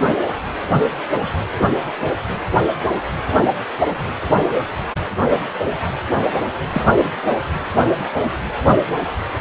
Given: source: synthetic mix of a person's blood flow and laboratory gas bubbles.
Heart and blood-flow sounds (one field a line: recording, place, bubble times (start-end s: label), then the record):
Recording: Doppler ultrasound of blood flow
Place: precordium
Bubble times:
6.69-7.09 s: bubbles
From the record:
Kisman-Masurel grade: 212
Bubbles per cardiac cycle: several, 3 to 8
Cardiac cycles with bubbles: 1 to 10%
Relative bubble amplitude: moderate (0.250 to 0.450)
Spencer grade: 1 (occasional bubble signal discernible with the cardiac motion signal, with majority of cardiac periods free of bubbles)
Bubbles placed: anywhere in the cardiac cycle